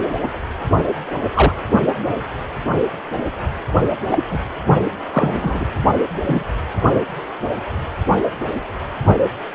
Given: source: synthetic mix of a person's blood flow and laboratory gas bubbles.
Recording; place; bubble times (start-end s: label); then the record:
Doppler ultrasound of blood flow; precordium
1.34-1.53 s: bubbles
4.11-4.18 s: bubbles
4.30-4.40 s: bubbles
5.12-5.65 s: bubbles
6.25-6.44 s: bubbles
From the record:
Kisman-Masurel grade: 123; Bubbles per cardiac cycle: 1 to 2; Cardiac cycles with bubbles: 10 to 50%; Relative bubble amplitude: loud (0.450 to 0.775); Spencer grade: 2 (many but less than half of the cardiac periods contain bubble signals, singularly or in groups); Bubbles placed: only in the low amplitude regions of the cardiac cycle